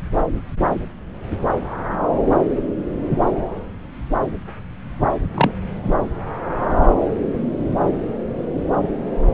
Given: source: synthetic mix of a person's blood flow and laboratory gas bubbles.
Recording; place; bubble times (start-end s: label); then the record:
Doppler ultrasound of blood flow; subclavian vein
5.34-5.51 s: bubbles
From the record:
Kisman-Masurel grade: 113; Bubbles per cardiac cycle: 1 to 2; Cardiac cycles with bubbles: 1 to 10%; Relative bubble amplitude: loud (0.450 to 0.775); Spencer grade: 1 (occasional bubble signal discernible with the cardiac motion signal, with majority of cardiac periods free of bubbles); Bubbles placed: anywhere in the cardiac cycle